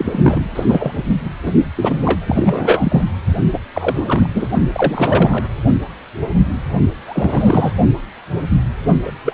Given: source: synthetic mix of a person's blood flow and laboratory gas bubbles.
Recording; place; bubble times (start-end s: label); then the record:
Doppler ultrasound of blood flow; precordium
0.00-0.44 s: bubbles
0.55-0.64 s: bubbles
0.67-1.04 s: bubbles
1.24-1.29 s: bubbles
1.42-1.52 s: bubbles
1.75-3.04 s: bubbles
3.52-3.61 s: bubbles
3.73-4.29 s: bubbles
4.34-4.47 s: bubbles
4.72-5.43 s: bubbles
7.05-7.73 s: bubbles
9.05-9.12 s: bubbles
9.25-9.33 s: bubbles
From the record:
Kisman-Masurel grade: 333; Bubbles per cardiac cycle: rolling drumbeat, 9 or more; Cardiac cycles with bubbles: 50 to 99%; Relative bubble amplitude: loud (0.450 to 0.775); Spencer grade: 3 (all of the cardiac periods contain showers or single bubble signals, but not dominating or overriding the cardiac motion signals); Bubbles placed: only in the low amplitude regions of the cardiac cycle